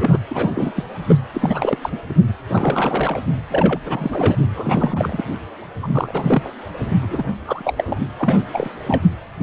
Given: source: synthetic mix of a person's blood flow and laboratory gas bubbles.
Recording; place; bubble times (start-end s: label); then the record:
Doppler ultrasound of blood flow; precordium
0.00-0.20 s: bubbles
0.31-0.84 s: bubbles
1.06-1.16 s: bubbles
1.34-1.78 s: bubbles
1.82-1.98 s: bubbles
2.08-2.15 s: bubbles
2.49-3.21 s: bubbles
3.50-3.79 s: bubbles
3.86-4.36 s: bubbles
4.46-5.25 s: bubbles
5.83-6.50 s: bubbles
7.01-7.29 s: bubbles
7.45-8.01 s: bubbles
8.18-8.43 s: bubbles
8.53-8.70 s: bubbles
8.86-9.02 s: bubbles
9.39-9.43 s: bubbles
From the record:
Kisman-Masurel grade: 332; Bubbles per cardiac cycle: rolling drumbeat, 9 or more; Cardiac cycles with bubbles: 50 to 99%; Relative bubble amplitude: moderate (0.250 to 0.450); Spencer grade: 3 (all of the cardiac periods contain showers or single bubble signals, but not dominating or overriding the cardiac motion signals); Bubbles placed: anywhere in the cardiac cycle